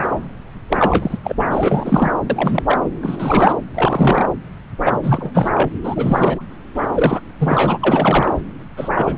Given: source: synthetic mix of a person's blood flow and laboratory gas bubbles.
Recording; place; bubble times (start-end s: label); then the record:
Doppler ultrasound of blood flow; subclavian vein
0.00-0.08 s: bubbles
0.69-1.18 s: bubbles
1.23-1.35 s: bubbles
1.39-2.11 s: bubbles
2.29-2.63 s: bubbles
2.67-2.78 s: bubbles
3.02-3.52 s: bubbles
3.74-4.28 s: bubbles
4.85-4.98 s: bubbles
5.03-5.50 s: bubbles
5.54-5.69 s: bubbles
5.83-6.42 s: bubbles
6.75-6.86 s: bubbles
6.94-7.20 s: bubbles
7.40-8.34 s: bubbles
8.76-8.89 s: bubbles
8.94-9.18 s: bubbles
From the record:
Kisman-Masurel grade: 343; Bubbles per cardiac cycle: rolling drumbeat, 9 or more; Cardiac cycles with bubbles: 100%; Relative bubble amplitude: loud (0.450 to 0.775); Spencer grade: 3 (all of the cardiac periods contain showers or single bubble signals, but not dominating or overriding the cardiac motion signals); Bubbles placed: anywhere in the cardiac cycle